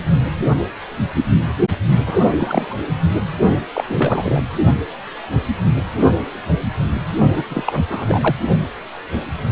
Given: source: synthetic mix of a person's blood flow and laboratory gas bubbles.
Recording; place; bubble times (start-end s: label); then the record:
Doppler ultrasound of blood flow; precordium
2.06-2.76 s: bubbles
3.74-3.84 s: bubbles
3.88-4.43 s: bubbles
7.35-7.43 s: bubbles
7.48-7.64 s: bubbles
7.67-7.82 s: bubbles
7.90-8.36 s: bubbles
From the record:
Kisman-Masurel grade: 232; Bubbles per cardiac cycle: several, 3 to 8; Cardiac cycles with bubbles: 50 to 99%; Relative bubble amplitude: moderate (0.250 to 0.450); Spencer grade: 3 (all of the cardiac periods contain showers or single bubble signals, but not dominating or overriding the cardiac motion signals); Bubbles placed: only in the low amplitude regions of the cardiac cycle